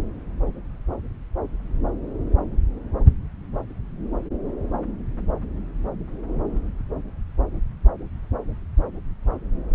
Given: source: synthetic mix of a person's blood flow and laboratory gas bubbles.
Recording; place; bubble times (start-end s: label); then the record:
Doppler ultrasound of blood flow; subclavian vein
no bubbles
From the record:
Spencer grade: 0 (complete lack of bubble signals)